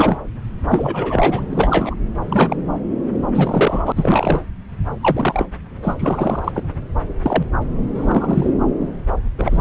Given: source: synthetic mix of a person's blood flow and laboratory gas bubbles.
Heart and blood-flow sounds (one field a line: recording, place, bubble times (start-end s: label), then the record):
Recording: Doppler ultrasound of blood flow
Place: subclavian vein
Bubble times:
0.00-0.21 s: bubbles
0.68-1.42 s: bubbles
1.50-1.95 s: bubbles
2.30-2.56 s: bubbles
3.34-3.92 s: bubbles
3.96-4.42 s: bubbles
5.01-5.46 s: bubbles
5.82-5.96 s: bubbles
5.99-6.52 s: bubbles
6.54-6.63 s: bubbles
7.22-7.46 s: bubbles
7.96-8.51 s: bubbles
9.38-9.61 s: bubbles
From the record:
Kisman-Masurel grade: 232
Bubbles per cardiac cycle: several, 3 to 8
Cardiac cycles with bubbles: 50 to 99%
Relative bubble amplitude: moderate (0.250 to 0.450)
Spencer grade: 3 (all of the cardiac periods contain showers or single bubble signals, but not dominating or overriding the cardiac motion signals)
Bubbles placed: anywhere in the cardiac cycle